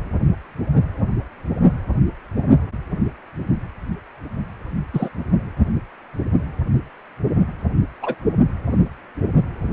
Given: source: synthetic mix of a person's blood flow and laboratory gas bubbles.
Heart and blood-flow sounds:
Doppler ultrasound of blood flow; precordium
4.93-5.09 s: bubbles
8.02-8.16 s: bubbles
From the record:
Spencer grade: 2 (many but less than half of the cardiac periods contain bubble signals, singularly or in groups); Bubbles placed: only in the low amplitude regions of the cardiac cycle

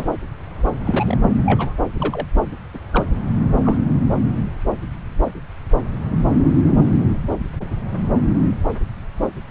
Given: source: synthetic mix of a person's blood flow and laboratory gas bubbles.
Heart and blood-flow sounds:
Doppler ultrasound of blood flow; subclavian vein
0.00-0.09 s: bubbles
0.85-1.17 s: bubbles
1.46-1.74 s: bubbles
1.99-2.27 s: bubbles
2.74-2.78 s: bubbles
2.93-3.04 s: bubbles
3.59-3.78 s: bubbles
From the record:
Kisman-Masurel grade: 122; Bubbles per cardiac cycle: 1 to 2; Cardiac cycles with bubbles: 10 to 50%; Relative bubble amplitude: moderate (0.250 to 0.450); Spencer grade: 2 (many but less than half of the cardiac periods contain bubble signals, singularly or in groups); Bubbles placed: anywhere in the cardiac cycle

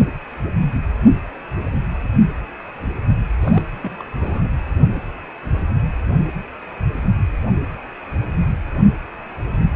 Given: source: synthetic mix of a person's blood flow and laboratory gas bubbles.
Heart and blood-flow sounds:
Doppler ultrasound of blood flow; precordium
3.40-3.63 s: bubbles
3.81-4.06 s: bubbles
4.21-4.49 s: bubbles
From the record:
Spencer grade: 1 (occasional bubble signal discernible with the cardiac motion signal, with majority of cardiac periods free of bubbles); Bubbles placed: only in the low amplitude regions of the cardiac cycle

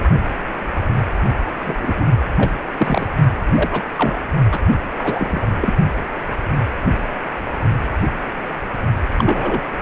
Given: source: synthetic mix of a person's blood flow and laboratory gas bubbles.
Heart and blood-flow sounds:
Doppler ultrasound of blood flow; precordium
1.65-2.04 s: bubbles
2.38-2.52 s: bubbles
2.77-3.07 s: bubbles
3.54-3.83 s: bubbles
3.96-4.18 s: bubbles
4.51-4.59 s: bubbles
4.99-5.49 s: bubbles
5.60-5.73 s: bubbles
9.18-9.62 s: bubbles
From the record:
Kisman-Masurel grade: 233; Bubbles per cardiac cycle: several, 3 to 8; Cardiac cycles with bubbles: 50 to 99%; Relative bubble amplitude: loud (0.450 to 0.775); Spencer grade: 3 (all of the cardiac periods contain showers or single bubble signals, but not dominating or overriding the cardiac motion signals); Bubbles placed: only in the low amplitude regions of the cardiac cycle

